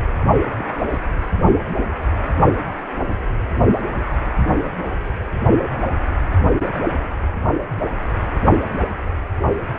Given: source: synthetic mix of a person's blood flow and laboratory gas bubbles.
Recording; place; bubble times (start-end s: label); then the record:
Doppler ultrasound of blood flow; precordium
0.58-0.66 s: bubbles
0.85-1.03 s: bubbles
From the record:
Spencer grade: 1 (occasional bubble signal discernible with the cardiac motion signal, with majority of cardiac periods free of bubbles); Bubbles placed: only in the low amplitude regions of the cardiac cycle